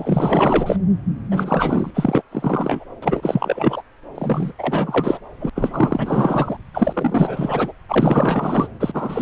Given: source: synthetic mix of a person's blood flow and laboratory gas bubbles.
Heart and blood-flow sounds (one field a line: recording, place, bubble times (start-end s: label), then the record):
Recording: Doppler ultrasound of blood flow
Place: subclavian vein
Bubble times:
0.00-0.76 s: bubbles
1.30-1.91 s: bubbles
1.94-2.22 s: bubbles
2.31-2.84 s: bubbles
3.02-3.83 s: bubbles
4.14-4.52 s: bubbles
4.58-5.19 s: bubbles
5.39-5.50 s: bubbles
5.55-6.57 s: bubbles
6.73-7.72 s: bubbles
7.88-8.68 s: bubbles
8.79-9.22 s: bubbles
From the record:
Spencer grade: 4 (maximum detectable bubble signal sounding continuously throughout systole and diastole of every cardiac period, and overriding the amplitude of the normal cardiac signals)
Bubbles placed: anywhere in the cardiac cycle